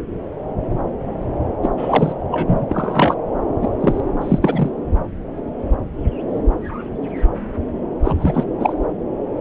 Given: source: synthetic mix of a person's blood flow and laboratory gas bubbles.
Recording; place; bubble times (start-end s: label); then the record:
Doppler ultrasound of blood flow; subclavian vein
1.62-1.71 s: bubbles
1.77-2.12 s: bubbles
2.31-2.66 s: bubbles
2.69-3.15 s: bubbles
3.61-3.69 s: bubbles
3.80-4.00 s: bubbles
4.20-4.39 s: bubbles
4.42-4.70 s: bubbles
8.04-8.44 s: bubbles
8.60-8.73 s: bubbles
From the record:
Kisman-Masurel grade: 223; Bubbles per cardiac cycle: several, 3 to 8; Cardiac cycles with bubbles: 10 to 50%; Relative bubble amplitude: loud (0.450 to 0.775); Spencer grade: 2 (many but less than half of the cardiac periods contain bubble signals, singularly or in groups); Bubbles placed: anywhere in the cardiac cycle